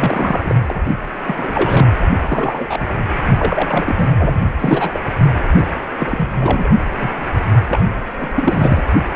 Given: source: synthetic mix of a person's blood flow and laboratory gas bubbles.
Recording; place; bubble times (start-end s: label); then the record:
Doppler ultrasound of blood flow; precordium
0.00-0.55 s: bubbles
0.67-0.80 s: bubbles
1.25-1.86 s: bubbles
2.19-3.06 s: bubbles
3.38-4.08 s: bubbles
4.18-4.40 s: bubbles
4.58-5.00 s: bubbles
5.50-5.65 s: bubbles
5.99-6.69 s: bubbles
6.96-7.11 s: bubbles
7.68-7.80 s: bubbles
8.19-8.33 s: bubbles
8.36-8.82 s: bubbles
9.13-9.16 s: bubbles
From the record:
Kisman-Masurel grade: 342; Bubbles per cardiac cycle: rolling drumbeat, 9 or more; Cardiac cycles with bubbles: 100%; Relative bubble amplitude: moderate (0.250 to 0.450); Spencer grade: 3 (all of the cardiac periods contain showers or single bubble signals, but not dominating or overriding the cardiac motion signals); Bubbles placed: only in the low amplitude regions of the cardiac cycle